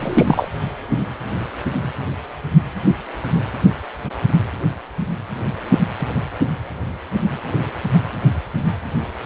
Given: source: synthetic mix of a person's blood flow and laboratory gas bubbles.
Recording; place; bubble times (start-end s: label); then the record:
Doppler ultrasound of blood flow; precordium
0.01-0.48 s: bubbles
From the record:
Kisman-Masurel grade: 113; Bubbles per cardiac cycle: 1 to 2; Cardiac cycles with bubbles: 1 to 10%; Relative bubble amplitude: loud (0.450 to 0.775); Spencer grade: 1 (occasional bubble signal discernible with the cardiac motion signal, with majority of cardiac periods free of bubbles); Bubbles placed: anywhere in the cardiac cycle